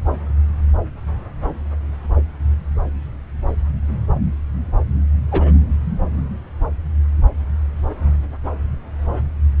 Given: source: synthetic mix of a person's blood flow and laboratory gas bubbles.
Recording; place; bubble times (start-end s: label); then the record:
Doppler ultrasound of blood flow; subclavian vein
5.31-5.53 s: bubbles
From the record:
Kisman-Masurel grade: 112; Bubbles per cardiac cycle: 1 to 2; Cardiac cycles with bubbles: 1 to 10%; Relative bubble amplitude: moderate (0.250 to 0.450); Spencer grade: 1 (occasional bubble signal discernible with the cardiac motion signal, with majority of cardiac periods free of bubbles); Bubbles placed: anywhere in the cardiac cycle